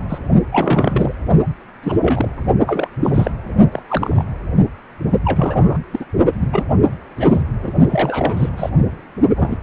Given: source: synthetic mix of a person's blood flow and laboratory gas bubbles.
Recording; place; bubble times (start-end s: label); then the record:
Doppler ultrasound of blood flow; precordium
0.09-0.19 s: bubbles
0.52-1.15 s: bubbles
1.83-1.97 s: bubbles
2.01-2.29 s: bubbles
2.67-2.88 s: bubbles
3.02-3.31 s: bubbles
3.72-3.82 s: bubbles
3.88-4.23 s: bubbles
5.24-5.78 s: bubbles
5.91-6.05 s: bubbles
6.39-6.64 s: bubbles
7.18-7.42 s: bubbles
7.62-7.72 s: bubbles
7.88-8.50 s: bubbles
8.57-8.70 s: bubbles
9.36-9.58 s: bubbles
From the record:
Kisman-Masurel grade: 242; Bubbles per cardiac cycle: several, 3 to 8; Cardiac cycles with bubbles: 100%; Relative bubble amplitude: moderate (0.250 to 0.450); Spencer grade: 3 (all of the cardiac periods contain showers or single bubble signals, but not dominating or overriding the cardiac motion signals); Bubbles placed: only in the low amplitude regions of the cardiac cycle